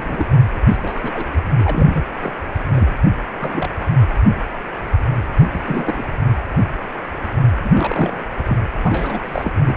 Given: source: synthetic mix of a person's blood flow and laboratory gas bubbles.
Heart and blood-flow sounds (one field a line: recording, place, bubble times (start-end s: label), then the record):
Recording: Doppler ultrasound of blood flow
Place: precordium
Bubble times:
0.00-0.26 s: bubbles
0.50-0.58 s: bubbles
0.68-0.77 s: bubbles
0.82-1.27 s: bubbles
1.58-2.03 s: bubbles
2.22-2.32 s: bubbles
2.73-2.96 s: bubbles
3.39-3.69 s: bubbles
3.79-3.86 s: bubbles
5.38-5.49 s: bubbles
5.52-6.04 s: bubbles
7.63-7.70 s: bubbles
7.73-8.18 s: bubbles
8.48-8.56 s: bubbles
8.82-9.52 s: bubbles
9.65-9.75 s: bubbles
From the record:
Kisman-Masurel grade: 232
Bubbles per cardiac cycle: several, 3 to 8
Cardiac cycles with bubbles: 50 to 99%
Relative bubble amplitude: moderate (0.250 to 0.450)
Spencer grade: 3 (all of the cardiac periods contain showers or single bubble signals, but not dominating or overriding the cardiac motion signals)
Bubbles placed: anywhere in the cardiac cycle